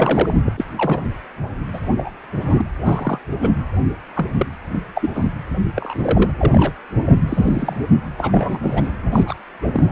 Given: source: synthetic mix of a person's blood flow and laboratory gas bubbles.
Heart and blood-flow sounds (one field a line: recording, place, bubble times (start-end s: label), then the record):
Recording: Doppler ultrasound of blood flow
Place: precordium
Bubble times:
0.00-0.35 s: bubbles
0.46-0.53 s: bubbles
0.57-0.65 s: bubbles
0.78-1.09 s: bubbles
1.73-1.79 s: bubbles
1.97-2.11 s: bubbles
2.41-2.70 s: bubbles
2.84-3.19 s: bubbles
3.40-3.52 s: bubbles
4.16-4.27 s: bubbles
4.37-4.47 s: bubbles
4.73-4.78 s: bubbles
4.95-5.10 s: bubbles
5.13-5.29 s: bubbles
5.76-6.31 s: bubbles
6.36-6.73 s: bubbles
7.00-7.17 s: bubbles
7.28-7.96 s: bubbles
8.18-8.91 s: bubbles
9.12-9.34 s: bubbles
9.62-9.69 s: bubbles
9.73-9.84 s: bubbles
From the record:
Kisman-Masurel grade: 242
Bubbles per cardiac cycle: several, 3 to 8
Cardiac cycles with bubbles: 100%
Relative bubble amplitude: moderate (0.250 to 0.450)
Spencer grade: 3 (all of the cardiac periods contain showers or single bubble signals, but not dominating or overriding the cardiac motion signals)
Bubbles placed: anywhere in the cardiac cycle